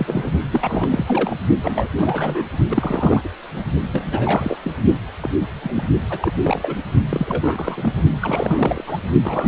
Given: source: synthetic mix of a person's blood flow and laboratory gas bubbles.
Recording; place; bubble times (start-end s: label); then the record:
Doppler ultrasound of blood flow; precordium
0.00-0.30 s: bubbles
0.50-1.36 s: bubbles
1.62-1.88 s: bubbles
1.98-2.44 s: bubbles
2.69-3.29 s: bubbles
3.56-3.65 s: bubbles
3.93-4.58 s: bubbles
4.64-4.72 s: bubbles
5.22-5.29 s: bubbles
5.62-5.84 s: bubbles
6.08-6.32 s: bubbles
6.43-6.76 s: bubbles
7.09-8.02 s: bubbles
8.21-8.97 s: bubbles
9.24-9.48 s: bubbles
From the record:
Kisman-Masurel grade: 343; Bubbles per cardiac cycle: rolling drumbeat, 9 or more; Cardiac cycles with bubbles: 100%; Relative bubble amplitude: loud (0.450 to 0.775); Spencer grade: 3 (all of the cardiac periods contain showers or single bubble signals, but not dominating or overriding the cardiac motion signals); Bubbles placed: only in the low amplitude regions of the cardiac cycle